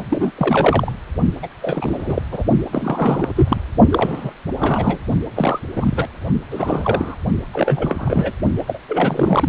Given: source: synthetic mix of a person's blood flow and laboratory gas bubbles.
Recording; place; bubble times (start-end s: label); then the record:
Doppler ultrasound of blood flow; precordium
0.00-0.05 s: bubbles
0.09-0.31 s: bubbles
0.37-0.92 s: bubbles
1.42-1.47 s: bubbles
1.62-2.22 s: bubbles
2.31-2.44 s: bubbles
2.72-3.31 s: bubbles
3.35-3.60 s: bubbles
3.92-4.33 s: bubbles
4.57-4.98 s: bubbles
5.35-5.59 s: bubbles
5.75-6.07 s: bubbles
6.50-7.15 s: bubbles
7.53-8.32 s: bubbles
8.57-8.62 s: bubbles
8.67-8.80 s: bubbles
8.88-9.49 s: bubbles
From the record:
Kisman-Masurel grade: 342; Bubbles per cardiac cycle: rolling drumbeat, 9 or more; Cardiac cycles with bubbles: 100%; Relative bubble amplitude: moderate (0.250 to 0.450); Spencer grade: 3 (all of the cardiac periods contain showers or single bubble signals, but not dominating or overriding the cardiac motion signals); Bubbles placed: only in the low amplitude regions of the cardiac cycle